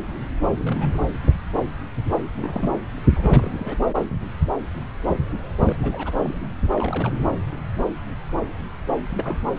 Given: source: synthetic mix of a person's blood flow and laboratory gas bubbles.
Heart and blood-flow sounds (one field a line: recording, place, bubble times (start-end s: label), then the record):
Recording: Doppler ultrasound of blood flow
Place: subclavian vein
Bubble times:
0.58-0.98 s: bubbles
2.35-2.75 s: bubbles
3.10-3.76 s: bubbles
5.59-5.76 s: bubbles
5.82-6.52 s: bubbles
6.72-7.13 s: bubbles
9.09-9.38 s: bubbles
From the record:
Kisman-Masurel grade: 221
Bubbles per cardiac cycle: several, 3 to 8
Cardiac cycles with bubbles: 10 to 50%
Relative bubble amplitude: barely perceptible (0.100 to 0.250)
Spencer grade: 2 (many but less than half of the cardiac periods contain bubble signals, singularly or in groups)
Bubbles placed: anywhere in the cardiac cycle